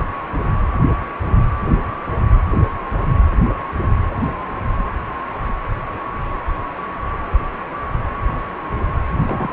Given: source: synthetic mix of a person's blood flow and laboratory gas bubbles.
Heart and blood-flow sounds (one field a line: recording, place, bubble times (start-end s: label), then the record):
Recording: Doppler ultrasound of blood flow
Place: precordium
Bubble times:
9.13-9.53 s: bubbles
From the record:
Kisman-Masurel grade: 211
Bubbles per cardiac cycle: several, 3 to 8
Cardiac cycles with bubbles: 1 to 10%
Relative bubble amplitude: barely perceptible (0.100 to 0.250)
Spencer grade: 1 (occasional bubble signal discernible with the cardiac motion signal, with majority of cardiac periods free of bubbles)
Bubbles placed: anywhere in the cardiac cycle